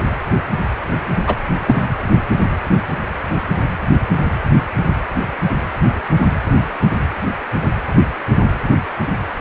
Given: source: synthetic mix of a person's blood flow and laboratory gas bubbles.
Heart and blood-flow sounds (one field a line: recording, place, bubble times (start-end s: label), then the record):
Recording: Doppler ultrasound of blood flow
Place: precordium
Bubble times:
1.27-1.36 s: bubbles
1.67-1.81 s: bubbles
From the record:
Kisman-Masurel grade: 113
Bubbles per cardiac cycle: 1 to 2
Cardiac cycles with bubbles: 1 to 10%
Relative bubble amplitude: loud (0.450 to 0.775)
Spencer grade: 1 (occasional bubble signal discernible with the cardiac motion signal, with majority of cardiac periods free of bubbles)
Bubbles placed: anywhere in the cardiac cycle